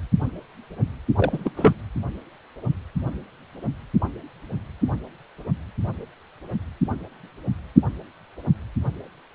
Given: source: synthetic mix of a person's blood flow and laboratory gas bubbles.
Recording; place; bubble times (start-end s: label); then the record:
Doppler ultrasound of blood flow; precordium
1.17-1.52 s: bubbles
1.56-1.73 s: bubbles
From the record:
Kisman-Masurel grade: 222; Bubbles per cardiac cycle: several, 3 to 8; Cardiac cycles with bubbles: 10 to 50%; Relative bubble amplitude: moderate (0.250 to 0.450); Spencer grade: 2 (many but less than half of the cardiac periods contain bubble signals, singularly or in groups); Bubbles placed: anywhere in the cardiac cycle